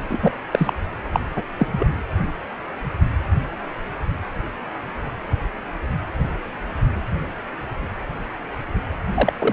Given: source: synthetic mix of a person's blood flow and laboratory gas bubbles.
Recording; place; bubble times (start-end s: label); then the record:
Doppler ultrasound of blood flow; precordium
0.10-0.19 s: bubbles
0.21-0.37 s: bubbles
0.51-0.73 s: bubbles
1.12-1.20 s: bubbles
1.35-1.43 s: bubbles
1.57-1.68 s: bubbles
1.72-1.90 s: bubbles
9.14-9.33 s: bubbles
9.39-9.53 s: bubbles
From the record:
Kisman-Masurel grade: 223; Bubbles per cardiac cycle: several, 3 to 8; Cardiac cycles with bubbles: 10 to 50%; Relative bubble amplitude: loud (0.450 to 0.775); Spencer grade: 2 (many but less than half of the cardiac periods contain bubble signals, singularly or in groups); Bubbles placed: anywhere in the cardiac cycle